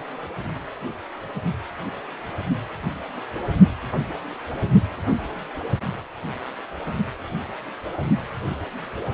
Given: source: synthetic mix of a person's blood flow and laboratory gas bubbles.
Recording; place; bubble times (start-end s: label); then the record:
Doppler ultrasound of blood flow; precordium
no bubbles
From the record:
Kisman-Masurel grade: 000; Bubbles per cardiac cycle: 0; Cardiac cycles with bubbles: 0%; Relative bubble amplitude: no bubbles discernible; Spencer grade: 0 (complete lack of bubble signals)